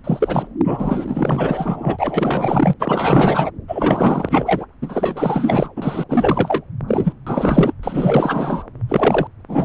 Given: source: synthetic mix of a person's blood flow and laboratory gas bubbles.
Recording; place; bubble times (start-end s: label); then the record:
Doppler ultrasound of blood flow; subclavian vein
0.04-0.47 s: bubbles
0.64-2.73 s: bubbles
2.79-3.51 s: bubbles
3.68-4.66 s: bubbles
4.82-5.69 s: bubbles
5.75-6.04 s: bubbles
6.08-6.61 s: bubbles
6.88-7.13 s: bubbles
7.27-7.73 s: bubbles
7.83-8.63 s: bubbles
8.88-9.27 s: bubbles
9.48-9.65 s: bubbles
From the record:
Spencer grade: 4 (maximum detectable bubble signal sounding continuously throughout systole and diastole of every cardiac period, and overriding the amplitude of the normal cardiac signals); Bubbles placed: anywhere in the cardiac cycle